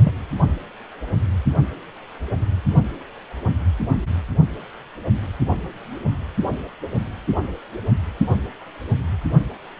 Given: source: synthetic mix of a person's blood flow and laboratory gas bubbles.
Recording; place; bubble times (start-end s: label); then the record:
Doppler ultrasound of blood flow; precordium
0.04-0.13 s: bubbles
From the record:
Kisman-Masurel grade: 212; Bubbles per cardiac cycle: several, 3 to 8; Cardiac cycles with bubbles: 1 to 10%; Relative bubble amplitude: moderate (0.250 to 0.450); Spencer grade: 1 (occasional bubble signal discernible with the cardiac motion signal, with majority of cardiac periods free of bubbles); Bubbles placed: anywhere in the cardiac cycle